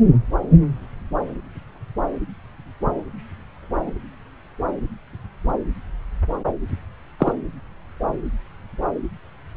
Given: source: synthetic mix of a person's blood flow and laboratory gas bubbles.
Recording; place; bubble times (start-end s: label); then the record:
Doppler ultrasound of blood flow; subclavian vein
7.19-7.33 s: bubbles
From the record:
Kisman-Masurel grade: 113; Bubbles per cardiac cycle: 1 to 2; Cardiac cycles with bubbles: 1 to 10%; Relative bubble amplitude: loud (0.450 to 0.775); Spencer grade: 1 (occasional bubble signal discernible with the cardiac motion signal, with majority of cardiac periods free of bubbles); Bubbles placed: anywhere in the cardiac cycle